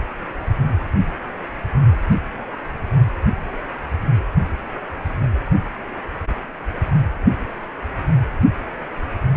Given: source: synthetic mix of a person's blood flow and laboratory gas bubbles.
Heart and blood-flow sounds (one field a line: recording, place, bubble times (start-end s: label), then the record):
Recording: Doppler ultrasound of blood flow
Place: precordium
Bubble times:
no bubbles
From the record:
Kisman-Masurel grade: 000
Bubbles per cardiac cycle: 0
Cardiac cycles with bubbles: 0%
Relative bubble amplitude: no bubbles discernible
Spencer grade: 0 (complete lack of bubble signals)